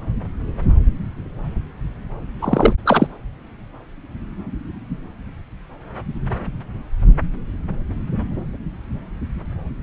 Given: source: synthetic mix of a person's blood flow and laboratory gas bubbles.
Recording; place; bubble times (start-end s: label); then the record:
Doppler ultrasound of blood flow; subclavian vein
2.42-2.73 s: bubbles
2.85-3.07 s: bubbles
From the record:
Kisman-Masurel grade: 213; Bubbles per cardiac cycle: several, 3 to 8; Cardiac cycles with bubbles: 1 to 10%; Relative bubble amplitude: loud (0.450 to 0.775); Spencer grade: 1 (occasional bubble signal discernible with the cardiac motion signal, with majority of cardiac periods free of bubbles); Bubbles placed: anywhere in the cardiac cycle